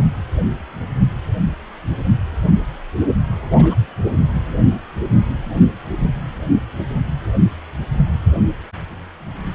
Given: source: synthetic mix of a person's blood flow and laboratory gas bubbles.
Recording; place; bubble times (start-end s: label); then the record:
Doppler ultrasound of blood flow; precordium
3.51-3.75 s: bubbles
From the record:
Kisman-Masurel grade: 111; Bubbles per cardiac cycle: 1 to 2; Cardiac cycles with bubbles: 1 to 10%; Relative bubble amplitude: barely perceptible (0.100 to 0.250); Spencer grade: 1 (occasional bubble signal discernible with the cardiac motion signal, with majority of cardiac periods free of bubbles); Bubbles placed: anywhere in the cardiac cycle